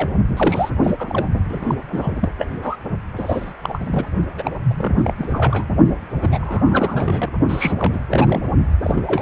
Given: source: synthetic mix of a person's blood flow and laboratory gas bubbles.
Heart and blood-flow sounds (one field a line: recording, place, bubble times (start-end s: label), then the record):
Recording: Doppler ultrasound of blood flow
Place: precordium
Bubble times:
0.00-0.14 s: bubbles
0.36-0.70 s: bubbles
0.84-0.95 s: bubbles
0.99-1.28 s: bubbles
1.49-1.75 s: bubbles
1.90-2.30 s: bubbles
2.38-2.48 s: bubbles
2.61-2.76 s: bubbles
3.16-3.52 s: bubbles
3.63-4.06 s: bubbles
4.38-4.52 s: bubbles
4.70-5.13 s: bubbles
5.18-5.67 s: bubbles
6.22-7.33 s: bubbles
7.48-8.00 s: bubbles
8.12-8.43 s: bubbles
8.83-9.04 s: bubbles
9.07-9.22 s: bubbles
From the record:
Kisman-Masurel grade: 342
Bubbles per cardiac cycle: rolling drumbeat, 9 or more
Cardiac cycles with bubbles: 100%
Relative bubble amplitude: moderate (0.250 to 0.450)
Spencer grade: 3 (all of the cardiac periods contain showers or single bubble signals, but not dominating or overriding the cardiac motion signals)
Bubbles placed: only in the low amplitude regions of the cardiac cycle